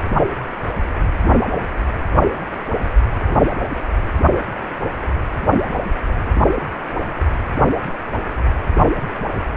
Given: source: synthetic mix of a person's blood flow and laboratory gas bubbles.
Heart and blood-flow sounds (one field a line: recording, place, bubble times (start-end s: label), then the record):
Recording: Doppler ultrasound of blood flow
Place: precordium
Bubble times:
no bubbles
From the record:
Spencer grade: 0 (complete lack of bubble signals)